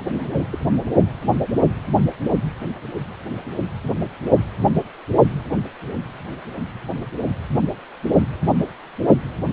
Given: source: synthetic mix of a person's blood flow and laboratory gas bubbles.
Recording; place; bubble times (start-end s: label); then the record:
Doppler ultrasound of blood flow; precordium
0.00-0.45 s: bubbles
0.52-0.59 s: bubbles
0.72-0.80 s: bubbles
From the record:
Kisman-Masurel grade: 211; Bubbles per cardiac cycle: several, 3 to 8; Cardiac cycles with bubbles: 1 to 10%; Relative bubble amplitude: barely perceptible (0.100 to 0.250); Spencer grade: 1 (occasional bubble signal discernible with the cardiac motion signal, with majority of cardiac periods free of bubbles); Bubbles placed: only in the low amplitude regions of the cardiac cycle